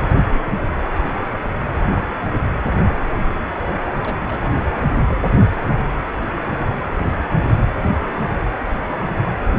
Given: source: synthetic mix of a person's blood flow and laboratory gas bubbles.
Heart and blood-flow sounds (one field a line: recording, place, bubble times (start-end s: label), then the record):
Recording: Doppler ultrasound of blood flow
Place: precordium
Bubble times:
0.20-0.80 s: bubbles
4.03-4.59 s: bubbles
4.90-4.96 s: bubbles
4.98-5.02 s: bubbles
5.08-5.57 s: bubbles
6.87-7.24 s: bubbles
7.42-7.51 s: bubbles
From the record:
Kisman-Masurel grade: 221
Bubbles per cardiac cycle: several, 3 to 8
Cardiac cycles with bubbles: 10 to 50%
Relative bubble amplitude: barely perceptible (0.100 to 0.250)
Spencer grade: 2 (many but less than half of the cardiac periods contain bubble signals, singularly or in groups)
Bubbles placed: anywhere in the cardiac cycle